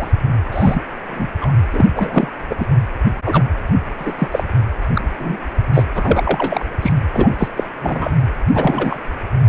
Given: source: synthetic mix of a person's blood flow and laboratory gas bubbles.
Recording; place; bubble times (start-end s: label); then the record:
Doppler ultrasound of blood flow; precordium
0.00-0.11 s: bubbles
0.51-0.82 s: bubbles
1.10-1.27 s: bubbles
1.41-1.52 s: bubbles
1.72-1.85 s: bubbles
1.96-2.28 s: bubbles
2.50-2.66 s: bubbles
3.26-3.44 s: bubbles
3.98-4.15 s: bubbles
4.18-4.28 s: bubbles
4.31-4.43 s: bubbles
4.95-5.01 s: bubbles
5.19-5.38 s: bubbles
5.73-5.83 s: bubbles
5.94-6.65 s: bubbles
6.81-6.92 s: bubbles
7.13-7.35 s: bubbles
7.38-7.48 s: bubbles
7.56-7.63 s: bubbles
7.81-8.12 s: bubbles
8.54-9.01 s: bubbles
From the record:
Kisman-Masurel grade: 243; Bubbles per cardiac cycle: several, 3 to 8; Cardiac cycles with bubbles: 100%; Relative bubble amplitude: loud (0.450 to 0.775); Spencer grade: 3 (all of the cardiac periods contain showers or single bubble signals, but not dominating or overriding the cardiac motion signals); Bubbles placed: anywhere in the cardiac cycle